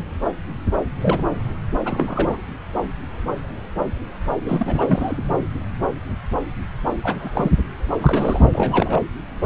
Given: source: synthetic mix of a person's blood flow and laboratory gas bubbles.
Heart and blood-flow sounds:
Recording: Doppler ultrasound of blood flow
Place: subclavian vein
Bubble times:
1.01-1.22 s: bubbles
1.85-2.37 s: bubbles
4.43-5.22 s: bubbles
7.03-7.51 s: bubbles
8.01-8.43 s: bubbles
8.52-9.01 s: bubbles
From the record:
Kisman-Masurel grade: 222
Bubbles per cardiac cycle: several, 3 to 8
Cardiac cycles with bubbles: 10 to 50%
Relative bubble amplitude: moderate (0.250 to 0.450)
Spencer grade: 2 (many but less than half of the cardiac periods contain bubble signals, singularly or in groups)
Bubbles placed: anywhere in the cardiac cycle

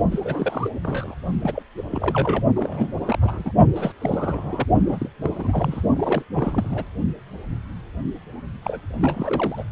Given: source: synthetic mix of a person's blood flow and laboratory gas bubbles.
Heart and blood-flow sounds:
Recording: Doppler ultrasound of blood flow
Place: precordium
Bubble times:
0.11-0.70 s: bubbles
0.83-1.15 s: bubbles
1.41-1.62 s: bubbles
1.77-1.83 s: bubbles
1.90-2.44 s: bubbles
2.56-2.94 s: bubbles
3.04-3.17 s: bubbles
3.21-3.52 s: bubbles
3.75-3.92 s: bubbles
4.00-4.66 s: bubbles
4.89-5.08 s: bubbles
5.22-5.82 s: bubbles
5.96-6.23 s: bubbles
6.33-6.86 s: bubbles
8.63-8.80 s: bubbles
8.99-9.64 s: bubbles
From the record:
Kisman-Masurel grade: 332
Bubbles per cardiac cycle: rolling drumbeat, 9 or more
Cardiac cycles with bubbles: 50 to 99%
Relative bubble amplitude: moderate (0.250 to 0.450)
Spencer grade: 3 (all of the cardiac periods contain showers or single bubble signals, but not dominating or overriding the cardiac motion signals)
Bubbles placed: only in the low amplitude regions of the cardiac cycle

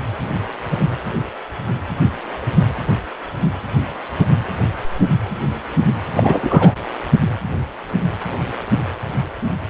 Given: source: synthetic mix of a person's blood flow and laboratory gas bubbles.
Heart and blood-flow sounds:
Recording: Doppler ultrasound of blood flow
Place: precordium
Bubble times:
6.13-6.72 s: bubbles
From the record:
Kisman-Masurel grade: 213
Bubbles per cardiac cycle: several, 3 to 8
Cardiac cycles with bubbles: 1 to 10%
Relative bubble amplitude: loud (0.450 to 0.775)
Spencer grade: 1 (occasional bubble signal discernible with the cardiac motion signal, with majority of cardiac periods free of bubbles)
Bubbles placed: anywhere in the cardiac cycle

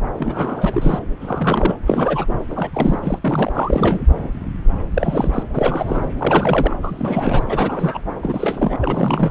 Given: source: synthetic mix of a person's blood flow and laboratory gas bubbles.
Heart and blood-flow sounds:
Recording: Doppler ultrasound of blood flow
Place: subclavian vein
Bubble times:
0.19-1.00 s: bubbles
1.21-1.78 s: bubbles
1.86-2.25 s: bubbles
2.50-2.71 s: bubbles
2.73-2.99 s: bubbles
3.02-3.19 s: bubbles
3.21-4.02 s: bubbles
4.93-5.43 s: bubbles
5.53-6.02 s: bubbles
6.18-6.76 s: bubbles
6.83-7.43 s: bubbles
7.48-7.99 s: bubbles
8.21-8.78 s: bubbles
8.81-9.31 s: bubbles
From the record:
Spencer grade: 3 (all of the cardiac periods contain showers or single bubble signals, but not dominating or overriding the cardiac motion signals)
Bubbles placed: anywhere in the cardiac cycle

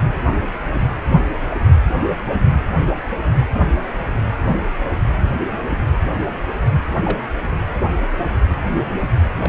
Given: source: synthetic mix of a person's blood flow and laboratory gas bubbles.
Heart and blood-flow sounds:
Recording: Doppler ultrasound of blood flow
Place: precordium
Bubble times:
7.03-7.18 s: bubbles
9.41-9.49 s: bubbles
From the record:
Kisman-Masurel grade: 121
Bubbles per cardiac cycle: 1 to 2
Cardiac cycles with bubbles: 10 to 50%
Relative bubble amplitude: barely perceptible (0.100 to 0.250)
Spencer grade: 2 (many but less than half of the cardiac periods contain bubble signals, singularly or in groups)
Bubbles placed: anywhere in the cardiac cycle

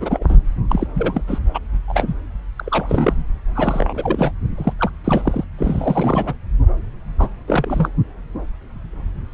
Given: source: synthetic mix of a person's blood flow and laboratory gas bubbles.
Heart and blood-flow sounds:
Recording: Doppler ultrasound of blood flow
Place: subclavian vein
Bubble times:
0.00-0.23 s: bubbles
0.28-0.38 s: bubbles
0.69-0.87 s: bubbles
0.95-1.22 s: bubbles
1.27-1.39 s: bubbles
1.54-1.59 s: bubbles
1.88-2.14 s: bubbles
2.57-3.23 s: bubbles
3.54-4.32 s: bubbles
4.57-4.73 s: bubbles
4.79-4.91 s: bubbles
5.04-5.45 s: bubbles
5.58-6.34 s: bubbles
7.18-7.29 s: bubbles
7.47-7.89 s: bubbles
From the record:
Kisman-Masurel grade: 332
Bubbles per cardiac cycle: rolling drumbeat, 9 or more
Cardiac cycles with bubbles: 50 to 99%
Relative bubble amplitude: moderate (0.250 to 0.450)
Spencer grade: 3 (all of the cardiac periods contain showers or single bubble signals, but not dominating or overriding the cardiac motion signals)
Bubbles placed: anywhere in the cardiac cycle

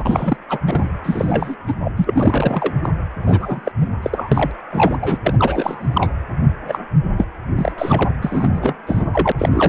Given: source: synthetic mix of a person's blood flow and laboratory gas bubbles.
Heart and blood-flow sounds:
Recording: Doppler ultrasound of blood flow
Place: precordium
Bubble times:
0.00-0.36 s: bubbles
0.49-0.59 s: bubbles
0.67-0.88 s: bubbles
1.04-1.56 s: bubbles
1.67-1.75 s: bubbles
1.80-1.92 s: bubbles
1.97-2.73 s: bubbles
2.83-2.89 s: bubbles
3.22-3.72 s: bubbles
3.80-3.88 s: bubbles
4.02-4.51 s: bubbles
4.71-5.21 s: bubbles
5.23-6.12 s: bubbles
6.67-6.81 s: bubbles
7.17-7.24 s: bubbles
7.55-7.72 s: bubbles
7.77-8.13 s: bubbles
8.21-8.73 s: bubbles
8.87-9.32 s: bubbles
9.39-9.69 s: bubbles
From the record:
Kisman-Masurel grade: 343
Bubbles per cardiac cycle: rolling drumbeat, 9 or more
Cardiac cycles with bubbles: 100%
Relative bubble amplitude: loud (0.450 to 0.775)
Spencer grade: 3 (all of the cardiac periods contain showers or single bubble signals, but not dominating or overriding the cardiac motion signals)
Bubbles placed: anywhere in the cardiac cycle

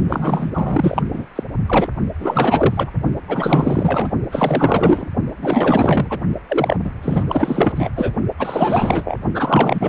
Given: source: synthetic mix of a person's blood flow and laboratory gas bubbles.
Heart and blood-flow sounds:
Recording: Doppler ultrasound of blood flow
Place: precordium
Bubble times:
0.09-1.02 s: bubbles
1.13-1.26 s: bubbles
1.35-1.43 s: bubbles
1.66-1.88 s: bubbles
2.19-2.90 s: bubbles
3.27-4.09 s: bubbles
4.31-5.08 s: bubbles
5.41-6.21 s: bubbles
6.47-6.76 s: bubbles
6.84-6.91 s: bubbles
7.02-7.89 s: bubbles
7.96-8.13 s: bubbles
8.38-9.18 s: bubbles
9.34-9.89 s: bubbles
From the record:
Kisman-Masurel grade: 444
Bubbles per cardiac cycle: continuous sound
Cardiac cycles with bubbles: 100%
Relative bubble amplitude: maximal (0.775 to 0.999)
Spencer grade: 4 (maximum detectable bubble signal sounding continuously throughout systole and diastole of every cardiac period, and overriding the amplitude of the normal cardiac signals)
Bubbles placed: only in the low amplitude regions of the cardiac cycle

